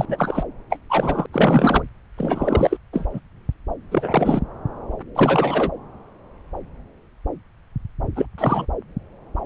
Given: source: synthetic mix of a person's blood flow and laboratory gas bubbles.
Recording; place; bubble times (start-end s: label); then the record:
Doppler ultrasound of blood flow; subclavian vein
0.00-0.43 s: bubbles
0.70-0.79 s: bubbles
0.89-1.26 s: bubbles
1.33-1.82 s: bubbles
2.18-2.77 s: bubbles
2.93-3.07 s: bubbles
3.13-3.20 s: bubbles
3.92-4.42 s: bubbles
5.15-5.72 s: bubbles
8.15-8.26 s: bubbles
8.38-8.67 s: bubbles
From the record:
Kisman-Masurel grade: 333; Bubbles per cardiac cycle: rolling drumbeat, 9 or more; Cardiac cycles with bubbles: 50 to 99%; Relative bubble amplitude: loud (0.450 to 0.775); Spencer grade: 3 (all of the cardiac periods contain showers or single bubble signals, but not dominating or overriding the cardiac motion signals); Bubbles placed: anywhere in the cardiac cycle